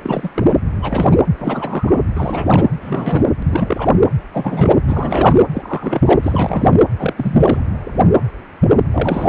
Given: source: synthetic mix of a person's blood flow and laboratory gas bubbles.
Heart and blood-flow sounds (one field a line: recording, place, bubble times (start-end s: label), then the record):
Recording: Doppler ultrasound of blood flow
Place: precordium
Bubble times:
0.02-0.30 s: bubbles
0.34-0.54 s: bubbles
0.81-1.18 s: bubbles
1.38-2.04 s: bubbles
2.14-2.65 s: bubbles
2.80-3.33 s: bubbles
3.43-3.90 s: bubbles
4.33-4.81 s: bubbles
4.86-5.43 s: bubbles
5.54-6.20 s: bubbles
6.22-6.71 s: bubbles
6.98-7.14 s: bubbles
7.17-7.60 s: bubbles
8.93-9.29 s: bubbles
From the record:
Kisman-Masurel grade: 333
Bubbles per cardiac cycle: rolling drumbeat, 9 or more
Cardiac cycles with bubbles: 50 to 99%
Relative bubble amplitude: loud (0.450 to 0.775)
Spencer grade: 3 (all of the cardiac periods contain showers or single bubble signals, but not dominating or overriding the cardiac motion signals)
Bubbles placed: anywhere in the cardiac cycle